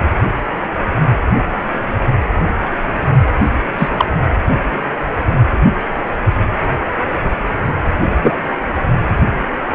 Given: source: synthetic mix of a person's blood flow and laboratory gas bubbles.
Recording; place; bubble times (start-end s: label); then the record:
Doppler ultrasound of blood flow; precordium
3.78-3.88 s: bubbles
3.96-4.05 s: bubbles
8.22-8.35 s: bubbles
From the record:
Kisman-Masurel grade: 123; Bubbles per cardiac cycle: 1 to 2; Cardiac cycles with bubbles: 10 to 50%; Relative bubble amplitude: loud (0.450 to 0.775); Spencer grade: 2 (many but less than half of the cardiac periods contain bubble signals, singularly or in groups); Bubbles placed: anywhere in the cardiac cycle